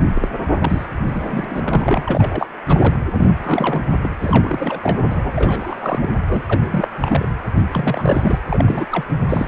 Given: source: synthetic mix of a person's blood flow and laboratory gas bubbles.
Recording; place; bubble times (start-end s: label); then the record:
Doppler ultrasound of blood flow; precordium
0.00-0.03 s: bubbles
0.14-0.28 s: bubbles
0.51-0.87 s: bubbles
1.07-2.02 s: bubbles
2.06-2.48 s: bubbles
2.68-2.98 s: bubbles
3.14-3.32 s: bubbles
3.43-3.91 s: bubbles
3.97-4.09 s: bubbles
4.21-6.12 s: bubbles
6.27-6.88 s: bubbles
7.02-7.33 s: bubbles
7.72-8.39 s: bubbles
8.49-8.86 s: bubbles
8.92-9.04 s: bubbles
9.29-9.48 s: bubbles
From the record:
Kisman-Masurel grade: 342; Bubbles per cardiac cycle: rolling drumbeat, 9 or more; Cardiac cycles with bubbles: 100%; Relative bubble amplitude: moderate (0.250 to 0.450); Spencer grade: 3 (all of the cardiac periods contain showers or single bubble signals, but not dominating or overriding the cardiac motion signals); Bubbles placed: anywhere in the cardiac cycle